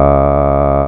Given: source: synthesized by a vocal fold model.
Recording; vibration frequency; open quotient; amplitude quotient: sustained vowel; 70 Hz; 0.5; 1.2